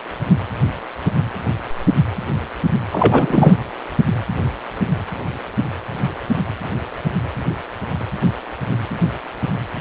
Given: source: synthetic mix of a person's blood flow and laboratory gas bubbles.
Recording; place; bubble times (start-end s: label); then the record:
Doppler ultrasound of blood flow; precordium
2.91-3.55 s: bubbles
From the record:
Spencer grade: 1 (occasional bubble signal discernible with the cardiac motion signal, with majority of cardiac periods free of bubbles); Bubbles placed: anywhere in the cardiac cycle